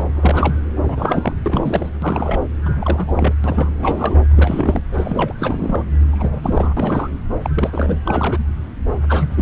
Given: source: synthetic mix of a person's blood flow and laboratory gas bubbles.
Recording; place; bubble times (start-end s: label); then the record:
Doppler ultrasound of blood flow; subclavian vein
0.00-0.03 s: bubbles
0.14-0.56 s: bubbles
0.84-1.35 s: bubbles
1.46-1.90 s: bubbles
2.02-2.39 s: bubbles
2.65-3.33 s: bubbles
3.44-3.73 s: bubbles
3.79-4.16 s: bubbles
4.29-4.81 s: bubbles
4.93-5.33 s: bubbles
5.39-5.85 s: bubbles
6.12-6.74 s: bubbles
6.77-7.10 s: bubbles
7.42-7.50 s: bubbles
7.54-7.70 s: bubbles
7.73-8.00 s: bubbles
8.06-8.44 s: bubbles
9.08-9.42 s: bubbles
From the record:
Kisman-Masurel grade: 332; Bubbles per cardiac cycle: rolling drumbeat, 9 or more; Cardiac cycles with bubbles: 50 to 99%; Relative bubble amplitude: moderate (0.250 to 0.450); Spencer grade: 3 (all of the cardiac periods contain showers or single bubble signals, but not dominating or overriding the cardiac motion signals); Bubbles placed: anywhere in the cardiac cycle